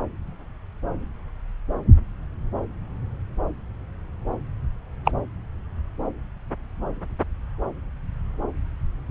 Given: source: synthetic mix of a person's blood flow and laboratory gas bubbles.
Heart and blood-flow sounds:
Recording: Doppler ultrasound of blood flow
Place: subclavian vein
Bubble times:
5.05-5.11 s: bubbles
From the record:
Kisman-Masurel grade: 112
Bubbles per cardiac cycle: 1 to 2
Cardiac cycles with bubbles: 1 to 10%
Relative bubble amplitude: moderate (0.250 to 0.450)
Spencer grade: 1 (occasional bubble signal discernible with the cardiac motion signal, with majority of cardiac periods free of bubbles)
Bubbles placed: anywhere in the cardiac cycle

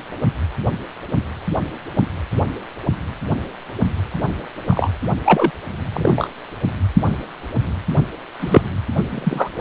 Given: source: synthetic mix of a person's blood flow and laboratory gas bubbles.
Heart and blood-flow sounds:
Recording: Doppler ultrasound of blood flow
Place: precordium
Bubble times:
4.69-4.88 s: bubbles
5.25-5.51 s: bubbles
5.94-6.28 s: bubbles
7.05-7.13 s: bubbles
8.39-8.62 s: bubbles
9.04-9.50 s: bubbles
From the record:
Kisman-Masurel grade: 123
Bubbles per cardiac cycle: 1 to 2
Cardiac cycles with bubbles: 10 to 50%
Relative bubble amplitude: loud (0.450 to 0.775)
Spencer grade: 2 (many but less than half of the cardiac periods contain bubble signals, singularly or in groups)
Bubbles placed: anywhere in the cardiac cycle

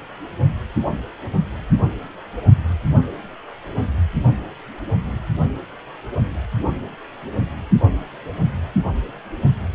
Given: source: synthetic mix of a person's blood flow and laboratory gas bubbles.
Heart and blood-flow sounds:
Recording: Doppler ultrasound of blood flow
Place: precordium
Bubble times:
4.87-4.93 s: bubbles
From the record:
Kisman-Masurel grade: 111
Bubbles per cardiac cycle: 1 to 2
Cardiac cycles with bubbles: 1 to 10%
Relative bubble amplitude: barely perceptible (0.100 to 0.250)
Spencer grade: 1 (occasional bubble signal discernible with the cardiac motion signal, with majority of cardiac periods free of bubbles)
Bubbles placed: only in the low amplitude regions of the cardiac cycle

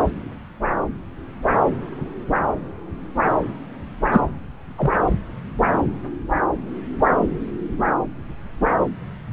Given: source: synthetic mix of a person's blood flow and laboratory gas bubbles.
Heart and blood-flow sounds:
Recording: Doppler ultrasound of blood flow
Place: subclavian vein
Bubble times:
4.12-4.21 s: bubbles
4.78-4.92 s: bubbles
From the record:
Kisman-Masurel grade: 223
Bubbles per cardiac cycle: several, 3 to 8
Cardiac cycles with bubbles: 10 to 50%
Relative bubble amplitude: loud (0.450 to 0.775)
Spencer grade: 2 (many but less than half of the cardiac periods contain bubble signals, singularly or in groups)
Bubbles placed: anywhere in the cardiac cycle

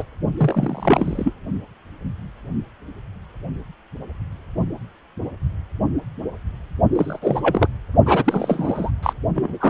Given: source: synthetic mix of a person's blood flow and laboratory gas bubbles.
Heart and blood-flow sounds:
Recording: Doppler ultrasound of blood flow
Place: precordium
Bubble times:
0.00-0.04 s: bubbles
0.36-1.33 s: bubbles
6.96-7.19 s: bubbles
7.21-7.67 s: bubbles
8.05-8.91 s: bubbles
9.03-9.13 s: bubbles
9.35-9.70 s: bubbles
From the record:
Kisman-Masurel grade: 233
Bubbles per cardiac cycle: several, 3 to 8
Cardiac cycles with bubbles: 50 to 99%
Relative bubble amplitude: loud (0.450 to 0.775)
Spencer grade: 3 (all of the cardiac periods contain showers or single bubble signals, but not dominating or overriding the cardiac motion signals)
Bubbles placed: only in the low amplitude regions of the cardiac cycle

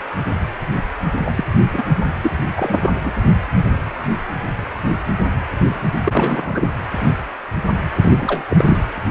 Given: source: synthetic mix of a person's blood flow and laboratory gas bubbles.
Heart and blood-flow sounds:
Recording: Doppler ultrasound of blood flow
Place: precordium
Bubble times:
1.25-1.32 s: bubbles
1.35-1.45 s: bubbles
1.73-1.84 s: bubbles
2.22-2.31 s: bubbles
2.56-2.89 s: bubbles
3.04-3.13 s: bubbles
6.04-6.75 s: bubbles
8.02-8.43 s: bubbles
8.49-8.84 s: bubbles
From the record:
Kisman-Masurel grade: 223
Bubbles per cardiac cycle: several, 3 to 8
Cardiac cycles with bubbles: 10 to 50%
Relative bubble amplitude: loud (0.450 to 0.775)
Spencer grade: 2 (many but less than half of the cardiac periods contain bubble signals, singularly or in groups)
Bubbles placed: anywhere in the cardiac cycle

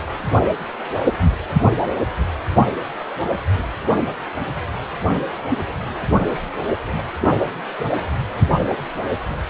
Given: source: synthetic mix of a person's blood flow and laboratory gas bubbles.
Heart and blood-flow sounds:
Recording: Doppler ultrasound of blood flow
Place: precordium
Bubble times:
no bubbles
From the record:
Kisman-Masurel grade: 000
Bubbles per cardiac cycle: 0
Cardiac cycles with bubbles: 0%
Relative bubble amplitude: no bubbles discernible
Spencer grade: 0 (complete lack of bubble signals)

